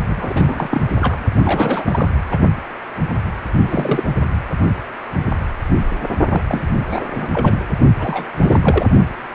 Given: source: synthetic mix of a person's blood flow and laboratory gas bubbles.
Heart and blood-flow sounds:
Doppler ultrasound of blood flow; precordium
0.08-0.82 s: bubbles
0.98-1.25 s: bubbles
1.38-2.12 s: bubbles
2.31-2.39 s: bubbles
3.61-4.04 s: bubbles
6.29-6.42 s: bubbles
6.48-6.62 s: bubbles
6.90-7.29 s: bubbles
7.33-7.65 s: bubbles
7.99-8.29 s: bubbles
8.34-8.85 s: bubbles
From the record:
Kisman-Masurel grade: 332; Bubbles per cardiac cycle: rolling drumbeat, 9 or more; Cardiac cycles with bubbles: 50 to 99%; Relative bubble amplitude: moderate (0.250 to 0.450); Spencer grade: 3 (all of the cardiac periods contain showers or single bubble signals, but not dominating or overriding the cardiac motion signals); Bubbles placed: only in the low amplitude regions of the cardiac cycle

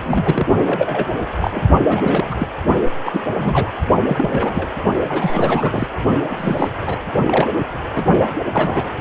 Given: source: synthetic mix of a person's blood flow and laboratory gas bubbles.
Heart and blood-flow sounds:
Doppler ultrasound of blood flow; precordium
0.05-0.47 s: bubbles
0.66-1.06 s: bubbles
1.41-1.61 s: bubbles
1.85-2.34 s: bubbles
2.38-2.47 s: bubbles
3.04-3.69 s: bubbles
4.07-4.69 s: bubbles
5.08-5.87 s: bubbles
6.29-6.69 s: bubbles
6.86-6.98 s: bubbles
7.27-7.50 s: bubbles
7.95-8.04 s: bubbles
8.40-8.95 s: bubbles
From the record:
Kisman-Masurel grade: 242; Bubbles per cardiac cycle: several, 3 to 8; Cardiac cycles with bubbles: 100%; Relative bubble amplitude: moderate (0.250 to 0.450); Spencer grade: 3 (all of the cardiac periods contain showers or single bubble signals, but not dominating or overriding the cardiac motion signals); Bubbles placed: only in the low amplitude regions of the cardiac cycle

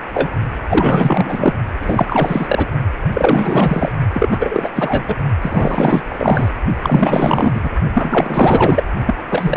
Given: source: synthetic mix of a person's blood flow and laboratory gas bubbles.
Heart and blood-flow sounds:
Doppler ultrasound of blood flow; precordium
0.14-0.31 s: bubbles
0.68-1.53 s: bubbles
1.80-2.67 s: bubbles
3.13-3.92 s: bubbles
4.13-4.70 s: bubbles
4.76-5.16 s: bubbles
5.41-6.02 s: bubbles
6.10-6.48 s: bubbles
6.83-7.70 s: bubbles
7.94-8.83 s: bubbles
9.05-9.14 s: bubbles
9.30-9.57 s: bubbles
From the record:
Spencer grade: 4 (maximum detectable bubble signal sounding continuously throughout systole and diastole of every cardiac period, and overriding the amplitude of the normal cardiac signals); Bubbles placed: only in the low amplitude regions of the cardiac cycle

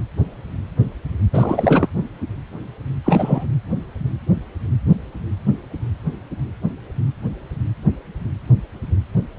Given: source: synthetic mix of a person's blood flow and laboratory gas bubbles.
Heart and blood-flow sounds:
Doppler ultrasound of blood flow; precordium
1.32-1.89 s: bubbles
3.04-3.46 s: bubbles
From the record:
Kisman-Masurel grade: 223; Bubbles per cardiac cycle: several, 3 to 8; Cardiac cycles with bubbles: 10 to 50%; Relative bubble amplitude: loud (0.450 to 0.775); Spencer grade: 2 (many but less than half of the cardiac periods contain bubble signals, singularly or in groups); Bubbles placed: anywhere in the cardiac cycle

